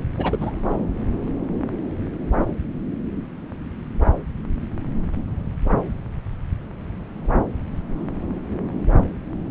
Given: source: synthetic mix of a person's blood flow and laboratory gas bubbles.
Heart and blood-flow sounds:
Doppler ultrasound of blood flow; subclavian vein
0.17-0.38 s: bubbles
0.41-0.51 s: bubbles
0.69-0.75 s: bubbles
From the record:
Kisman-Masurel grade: 211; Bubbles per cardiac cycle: several, 3 to 8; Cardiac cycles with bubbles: 1 to 10%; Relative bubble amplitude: barely perceptible (0.100 to 0.250); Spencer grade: 1 (occasional bubble signal discernible with the cardiac motion signal, with majority of cardiac periods free of bubbles); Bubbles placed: anywhere in the cardiac cycle

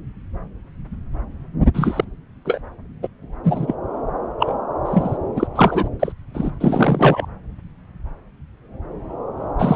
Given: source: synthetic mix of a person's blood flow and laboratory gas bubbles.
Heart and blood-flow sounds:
Doppler ultrasound of blood flow; subclavian vein
1.73-2.04 s: bubbles
2.44-2.61 s: bubbles
3.02-3.08 s: bubbles
3.44-3.75 s: bubbles
4.39-4.54 s: bubbles
4.84-5.17 s: bubbles
5.36-5.47 s: bubbles
5.55-5.88 s: bubbles
6.00-6.12 s: bubbles
6.34-6.51 s: bubbles
6.60-7.26 s: bubbles
9.59-9.75 s: bubbles
From the record:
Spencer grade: 3 (all of the cardiac periods contain showers or single bubble signals, but not dominating or overriding the cardiac motion signals); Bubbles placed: anywhere in the cardiac cycle

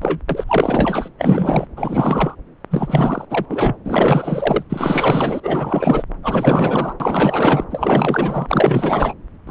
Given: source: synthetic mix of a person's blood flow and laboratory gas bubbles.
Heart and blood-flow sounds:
Doppler ultrasound of blood flow; subclavian vein
0.01-0.20 s: bubbles
0.29-0.45 s: bubbles
0.48-1.09 s: bubbles
1.18-1.67 s: bubbles
1.77-2.35 s: bubbles
2.71-3.25 s: bubbles
3.29-3.46 s: bubbles
3.49-3.75 s: bubbles
3.84-4.63 s: bubbles
4.70-5.40 s: bubbles
5.42-6.04 s: bubbles
6.22-6.93 s: bubbles
7.00-7.64 s: bubbles
7.70-9.14 s: bubbles
9.47-9.50 s: bubbles
From the record:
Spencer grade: 4 (maximum detectable bubble signal sounding continuously throughout systole and diastole of every cardiac period, and overriding the amplitude of the normal cardiac signals); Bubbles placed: anywhere in the cardiac cycle

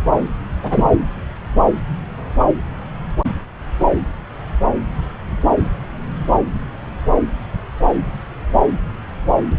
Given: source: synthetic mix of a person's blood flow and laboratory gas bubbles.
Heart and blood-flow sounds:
Doppler ultrasound of blood flow; subclavian vein
0.62-0.97 s: bubbles
From the record:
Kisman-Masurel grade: 213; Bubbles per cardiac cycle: several, 3 to 8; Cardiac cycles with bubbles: 1 to 10%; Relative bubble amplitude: loud (0.450 to 0.775); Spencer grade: 1 (occasional bubble signal discernible with the cardiac motion signal, with majority of cardiac periods free of bubbles); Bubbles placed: anywhere in the cardiac cycle

